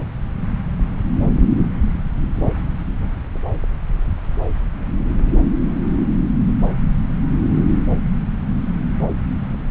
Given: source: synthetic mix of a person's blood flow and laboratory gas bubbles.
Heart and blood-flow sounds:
Doppler ultrasound of blood flow; subclavian vein
no bubbles
From the record:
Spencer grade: 0 (complete lack of bubble signals)

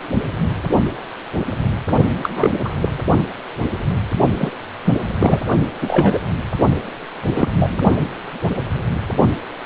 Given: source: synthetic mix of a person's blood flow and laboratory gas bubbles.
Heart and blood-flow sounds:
Doppler ultrasound of blood flow; precordium
2.23-2.29 s: bubbles
2.35-2.50 s: bubbles
2.65-2.69 s: bubbles
2.81-2.89 s: bubbles
4.38-4.51 s: bubbles
4.85-4.94 s: bubbles
5.19-5.39 s: bubbles
5.81-6.20 s: bubbles
7.32-7.48 s: bubbles
7.51-7.82 s: bubbles
From the record:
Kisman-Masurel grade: 233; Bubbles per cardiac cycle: several, 3 to 8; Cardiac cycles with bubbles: 50 to 99%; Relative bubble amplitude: loud (0.450 to 0.775); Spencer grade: 3 (all of the cardiac periods contain showers or single bubble signals, but not dominating or overriding the cardiac motion signals); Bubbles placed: only in the low amplitude regions of the cardiac cycle

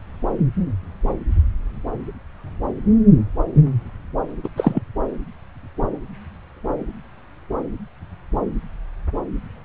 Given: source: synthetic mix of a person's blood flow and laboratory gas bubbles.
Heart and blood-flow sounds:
Doppler ultrasound of blood flow; subclavian vein
4.43-4.49 s: bubbles
4.57-4.81 s: bubbles
From the record:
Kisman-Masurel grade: 223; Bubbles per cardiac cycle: several, 3 to 8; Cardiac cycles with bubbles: 10 to 50%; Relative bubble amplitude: loud (0.450 to 0.775); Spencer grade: 2 (many but less than half of the cardiac periods contain bubble signals, singularly or in groups); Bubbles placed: anywhere in the cardiac cycle

